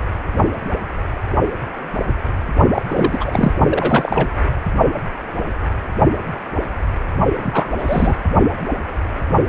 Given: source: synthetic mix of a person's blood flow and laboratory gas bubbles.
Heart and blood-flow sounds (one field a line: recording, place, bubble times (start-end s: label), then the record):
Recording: Doppler ultrasound of blood flow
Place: precordium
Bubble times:
2.74-2.82 s: bubbles
2.89-3.53 s: bubbles
3.70-4.29 s: bubbles
7.39-7.71 s: bubbles
7.78-8.15 s: bubbles
From the record:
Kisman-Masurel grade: 223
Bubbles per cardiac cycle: several, 3 to 8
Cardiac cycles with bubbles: 10 to 50%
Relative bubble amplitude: loud (0.450 to 0.775)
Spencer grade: 2 (many but less than half of the cardiac periods contain bubble signals, singularly or in groups)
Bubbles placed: only in the low amplitude regions of the cardiac cycle